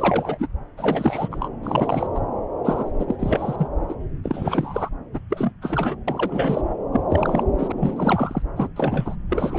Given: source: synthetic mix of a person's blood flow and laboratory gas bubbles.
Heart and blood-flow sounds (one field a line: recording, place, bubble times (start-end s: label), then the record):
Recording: Doppler ultrasound of blood flow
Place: subclavian vein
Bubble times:
0.00-0.47 s: bubbles
0.77-1.29 s: bubbles
1.31-1.48 s: bubbles
1.63-2.07 s: bubbles
2.15-2.19 s: bubbles
2.64-2.92 s: bubbles
2.99-3.05 s: bubbles
3.08-3.16 s: bubbles
3.19-3.68 s: bubbles
3.89-3.94 s: bubbles
4.23-4.89 s: bubbles
5.13-5.19 s: bubbles
5.29-5.52 s: bubbles
5.61-5.96 s: bubbles
6.07-6.72 s: bubbles
6.92-7.01 s: bubbles
7.09-7.43 s: bubbles
7.58-7.72 s: bubbles
7.76-8.42 s: bubbles
8.55-8.68 s: bubbles
8.76-9.15 s: bubbles
9.29-9.59 s: bubbles
From the record:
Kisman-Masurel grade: 332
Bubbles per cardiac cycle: rolling drumbeat, 9 or more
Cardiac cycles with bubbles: 50 to 99%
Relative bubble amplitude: moderate (0.250 to 0.450)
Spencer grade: 3 (all of the cardiac periods contain showers or single bubble signals, but not dominating or overriding the cardiac motion signals)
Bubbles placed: anywhere in the cardiac cycle